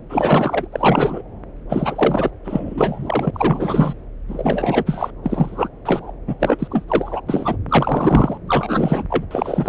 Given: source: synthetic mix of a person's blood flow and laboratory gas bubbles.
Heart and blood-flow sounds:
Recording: Doppler ultrasound of blood flow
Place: subclavian vein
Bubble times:
0.10-0.68 s: bubbles
0.72-1.22 s: bubbles
1.69-2.31 s: bubbles
2.44-3.31 s: bubbles
3.33-3.95 s: bubbles
4.28-5.10 s: bubbles
5.23-5.68 s: bubbles
5.85-6.11 s: bubbles
6.27-6.35 s: bubbles
6.39-6.68 s: bubbles
6.71-6.84 s: bubbles
6.88-7.21 s: bubbles
7.29-7.57 s: bubbles
7.68-8.38 s: bubbles
8.47-9.04 s: bubbles
9.10-9.25 s: bubbles
9.31-9.69 s: bubbles
From the record:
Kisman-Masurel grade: 343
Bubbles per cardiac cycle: rolling drumbeat, 9 or more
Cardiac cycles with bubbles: 100%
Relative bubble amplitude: loud (0.450 to 0.775)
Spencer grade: 3 (all of the cardiac periods contain showers or single bubble signals, but not dominating or overriding the cardiac motion signals)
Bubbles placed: anywhere in the cardiac cycle

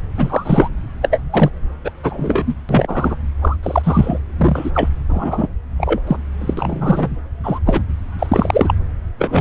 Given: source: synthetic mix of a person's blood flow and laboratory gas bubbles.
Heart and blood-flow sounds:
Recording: Doppler ultrasound of blood flow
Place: subclavian vein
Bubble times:
0.15-0.70 s: bubbles
1.01-1.22 s: bubbles
1.31-1.50 s: bubbles
1.84-1.91 s: bubbles
2.03-2.55 s: bubbles
2.69-3.15 s: bubbles
3.41-3.56 s: bubbles
3.62-4.19 s: bubbles
4.38-4.71 s: bubbles
4.74-4.89 s: bubbles
5.09-5.48 s: bubbles
5.77-6.00 s: bubbles
6.07-6.17 s: bubbles
6.41-6.54 s: bubbles
6.57-7.10 s: bubbles
7.44-7.60 s: bubbles
7.66-7.84 s: bubbles
8.18-8.74 s: bubbles
9.18-9.41 s: bubbles
From the record:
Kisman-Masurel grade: 243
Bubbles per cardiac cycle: several, 3 to 8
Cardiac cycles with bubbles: 100%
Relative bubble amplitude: loud (0.450 to 0.775)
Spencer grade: 3 (all of the cardiac periods contain showers or single bubble signals, but not dominating or overriding the cardiac motion signals)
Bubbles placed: anywhere in the cardiac cycle

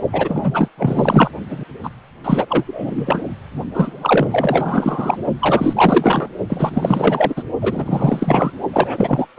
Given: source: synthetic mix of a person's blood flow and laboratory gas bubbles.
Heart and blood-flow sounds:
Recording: Doppler ultrasound of blood flow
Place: precordium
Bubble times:
0.12-0.68 s: bubbles
0.77-1.31 s: bubbles
1.50-1.64 s: bubbles
1.83-1.90 s: bubbles
2.24-2.46 s: bubbles
2.48-3.21 s: bubbles
3.73-5.17 s: bubbles
5.39-6.28 s: bubbles
6.49-7.43 s: bubbles
7.61-8.52 s: bubbles
8.72-9.28 s: bubbles
9.37-9.39 s: bubbles
From the record:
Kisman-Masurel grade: 444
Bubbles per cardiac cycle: continuous sound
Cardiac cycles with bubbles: 100%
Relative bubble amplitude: maximal (0.775 to 0.999)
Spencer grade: 4 (maximum detectable bubble signal sounding continuously throughout systole and diastole of every cardiac period, and overriding the amplitude of the normal cardiac signals)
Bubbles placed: only in the low amplitude regions of the cardiac cycle

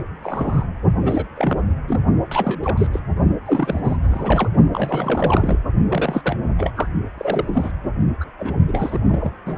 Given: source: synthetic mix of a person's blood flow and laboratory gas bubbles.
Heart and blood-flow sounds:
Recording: Doppler ultrasound of blood flow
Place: precordium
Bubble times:
0.00-0.02 s: bubbles
0.23-0.66 s: bubbles
1.02-1.25 s: bubbles
1.36-1.61 s: bubbles
1.88-2.00 s: bubbles
2.31-2.60 s: bubbles
2.62-2.87 s: bubbles
2.93-3.00 s: bubbles
3.46-3.80 s: bubbles
3.83-3.97 s: bubbles
4.03-4.49 s: bubbles
4.73-5.61 s: bubbles
5.91-6.37 s: bubbles
6.58-6.72 s: bubbles
6.76-6.89 s: bubbles
7.17-7.72 s: bubbles
8.21-8.25 s: bubbles
8.38-8.54 s: bubbles
8.67-8.99 s: bubbles
9.08-9.30 s: bubbles
9.46-9.58 s: bubbles
From the record:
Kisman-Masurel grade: 342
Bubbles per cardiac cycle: rolling drumbeat, 9 or more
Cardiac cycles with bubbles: 100%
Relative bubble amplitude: moderate (0.250 to 0.450)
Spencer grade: 3 (all of the cardiac periods contain showers or single bubble signals, but not dominating or overriding the cardiac motion signals)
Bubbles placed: only in the low amplitude regions of the cardiac cycle

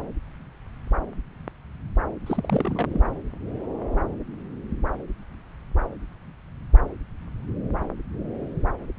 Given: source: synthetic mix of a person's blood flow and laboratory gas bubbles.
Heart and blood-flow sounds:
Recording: Doppler ultrasound of blood flow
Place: subclavian vein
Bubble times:
2.26-3.00 s: bubbles
From the record:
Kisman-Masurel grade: 211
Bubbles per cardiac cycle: several, 3 to 8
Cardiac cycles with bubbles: 1 to 10%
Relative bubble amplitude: barely perceptible (0.100 to 0.250)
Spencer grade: 1 (occasional bubble signal discernible with the cardiac motion signal, with majority of cardiac periods free of bubbles)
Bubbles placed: anywhere in the cardiac cycle

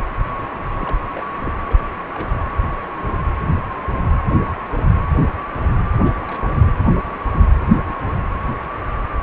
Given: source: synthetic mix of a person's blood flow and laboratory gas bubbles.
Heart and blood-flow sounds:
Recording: Doppler ultrasound of blood flow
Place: precordium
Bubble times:
0.71-0.97 s: bubbles
1.15-1.21 s: bubbles
1.40-1.62 s: bubbles
1.67-1.75 s: bubbles
2.13-2.40 s: bubbles
6.03-6.13 s: bubbles
6.22-6.73 s: bubbles
From the record:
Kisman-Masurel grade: 221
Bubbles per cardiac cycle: several, 3 to 8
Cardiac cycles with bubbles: 10 to 50%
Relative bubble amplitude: barely perceptible (0.100 to 0.250)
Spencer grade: 2 (many but less than half of the cardiac periods contain bubble signals, singularly or in groups)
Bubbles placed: anywhere in the cardiac cycle

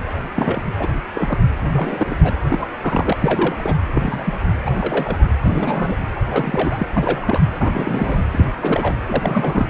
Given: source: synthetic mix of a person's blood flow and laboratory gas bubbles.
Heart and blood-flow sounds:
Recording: Doppler ultrasound of blood flow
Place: precordium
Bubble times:
0.35-0.60 s: bubbles
0.78-0.94 s: bubbles
1.15-1.38 s: bubbles
1.72-2.35 s: bubbles
2.49-2.67 s: bubbles
2.81-3.17 s: bubbles
3.19-3.76 s: bubbles
3.94-4.38 s: bubbles
4.65-5.28 s: bubbles
5.43-5.96 s: bubbles
6.16-6.20 s: bubbles
6.29-6.86 s: bubbles
6.94-7.42 s: bubbles
7.59-8.21 s: bubbles
8.31-8.45 s: bubbles
8.61-8.95 s: bubbles
9.06-9.69 s: bubbles
From the record:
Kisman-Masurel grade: 242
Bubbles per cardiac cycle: several, 3 to 8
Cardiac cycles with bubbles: 100%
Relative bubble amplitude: moderate (0.250 to 0.450)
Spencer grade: 3 (all of the cardiac periods contain showers or single bubble signals, but not dominating or overriding the cardiac motion signals)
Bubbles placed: anywhere in the cardiac cycle

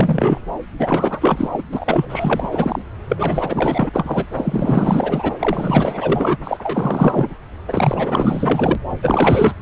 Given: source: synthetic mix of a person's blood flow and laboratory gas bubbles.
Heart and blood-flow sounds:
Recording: Doppler ultrasound of blood flow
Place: subclavian vein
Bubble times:
0.00-0.41 s: bubbles
0.78-1.49 s: bubbles
1.52-1.63 s: bubbles
1.71-2.82 s: bubbles
3.08-3.90 s: bubbles
3.93-4.26 s: bubbles
4.33-5.32 s: bubbles
5.38-6.38 s: bubbles
6.43-7.34 s: bubbles
7.67-8.75 s: bubbles
9.01-9.53 s: bubbles
From the record:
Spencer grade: 4 (maximum detectable bubble signal sounding continuously throughout systole and diastole of every cardiac period, and overriding the amplitude of the normal cardiac signals)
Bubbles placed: anywhere in the cardiac cycle

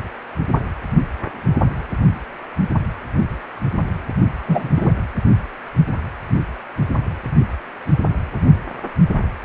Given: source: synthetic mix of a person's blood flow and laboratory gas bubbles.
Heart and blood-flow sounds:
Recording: Doppler ultrasound of blood flow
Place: precordium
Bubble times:
4.47-4.68 s: bubbles
4.76-4.93 s: bubbles
From the record:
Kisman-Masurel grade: 113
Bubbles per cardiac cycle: 1 to 2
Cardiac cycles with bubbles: 1 to 10%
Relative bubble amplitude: loud (0.450 to 0.775)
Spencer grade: 1 (occasional bubble signal discernible with the cardiac motion signal, with majority of cardiac periods free of bubbles)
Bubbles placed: anywhere in the cardiac cycle

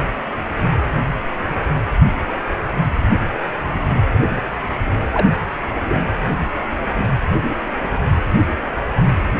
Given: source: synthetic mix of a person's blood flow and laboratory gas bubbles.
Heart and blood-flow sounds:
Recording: Doppler ultrasound of blood flow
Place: precordium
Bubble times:
5.14-5.27 s: bubbles
5.88-6.04 s: bubbles
From the record:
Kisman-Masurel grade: 112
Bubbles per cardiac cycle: 1 to 2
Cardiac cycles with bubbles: 1 to 10%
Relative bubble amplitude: moderate (0.250 to 0.450)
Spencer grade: 1 (occasional bubble signal discernible with the cardiac motion signal, with majority of cardiac periods free of bubbles)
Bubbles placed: anywhere in the cardiac cycle

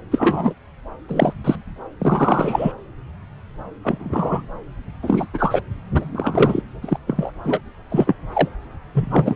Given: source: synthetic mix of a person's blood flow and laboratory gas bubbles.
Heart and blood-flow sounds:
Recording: Doppler ultrasound of blood flow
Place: subclavian vein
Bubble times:
0.11-0.54 s: bubbles
1.08-1.33 s: bubbles
1.44-1.55 s: bubbles
1.99-2.72 s: bubbles
3.83-4.42 s: bubbles
5.02-5.27 s: bubbles
5.33-5.60 s: bubbles
5.93-6.05 s: bubbles
6.12-6.61 s: bubbles
6.81-6.98 s: bubbles
7.07-7.30 s: bubbles
7.44-7.59 s: bubbles
7.91-8.16 s: bubbles
8.34-8.49 s: bubbles
8.94-9.36 s: bubbles
From the record:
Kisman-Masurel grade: 243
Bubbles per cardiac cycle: several, 3 to 8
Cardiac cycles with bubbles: 100%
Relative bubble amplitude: loud (0.450 to 0.775)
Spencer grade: 3 (all of the cardiac periods contain showers or single bubble signals, but not dominating or overriding the cardiac motion signals)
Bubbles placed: anywhere in the cardiac cycle

